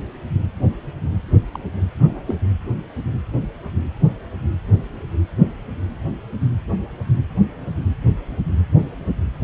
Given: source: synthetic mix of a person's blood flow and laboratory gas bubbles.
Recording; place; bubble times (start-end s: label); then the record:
Doppler ultrasound of blood flow; precordium
1.53-1.59 s: bubbles
1.99-2.22 s: bubbles
2.26-2.34 s: bubbles
From the record:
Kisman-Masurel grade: 211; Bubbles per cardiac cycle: several, 3 to 8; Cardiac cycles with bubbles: 1 to 10%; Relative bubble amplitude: barely perceptible (0.100 to 0.250); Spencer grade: 1 (occasional bubble signal discernible with the cardiac motion signal, with majority of cardiac periods free of bubbles); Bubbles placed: anywhere in the cardiac cycle